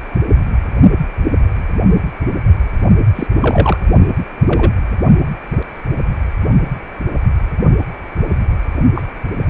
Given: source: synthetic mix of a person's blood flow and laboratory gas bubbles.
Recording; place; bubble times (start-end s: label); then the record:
Doppler ultrasound of blood flow; precordium
3.15-3.27 s: bubbles
3.41-3.78 s: bubbles
4.46-4.72 s: bubbles
8.96-9.03 s: bubbles
From the record:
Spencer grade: 2 (many but less than half of the cardiac periods contain bubble signals, singularly or in groups); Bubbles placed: only in the low amplitude regions of the cardiac cycle